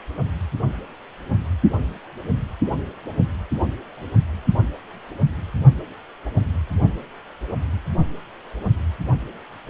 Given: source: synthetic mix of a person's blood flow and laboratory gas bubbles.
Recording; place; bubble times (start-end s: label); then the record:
Doppler ultrasound of blood flow; precordium
no bubbles
From the record:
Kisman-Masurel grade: 000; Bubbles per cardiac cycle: 0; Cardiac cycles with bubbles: 0%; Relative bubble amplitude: no bubbles discernible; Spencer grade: 0 (complete lack of bubble signals)